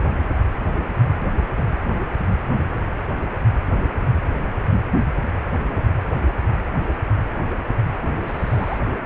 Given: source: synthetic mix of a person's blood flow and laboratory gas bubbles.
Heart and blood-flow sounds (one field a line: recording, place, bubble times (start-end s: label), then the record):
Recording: Doppler ultrasound of blood flow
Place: precordium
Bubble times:
8.03-8.07 s: bubbles
8.23-8.80 s: bubbles
From the record:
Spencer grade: 1 (occasional bubble signal discernible with the cardiac motion signal, with majority of cardiac periods free of bubbles)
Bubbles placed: only in the low amplitude regions of the cardiac cycle